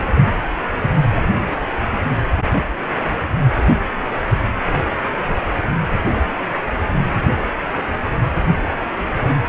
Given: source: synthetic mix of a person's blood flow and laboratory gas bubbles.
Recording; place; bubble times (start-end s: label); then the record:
Doppler ultrasound of blood flow; precordium
no bubbles
From the record:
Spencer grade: 0 (complete lack of bubble signals)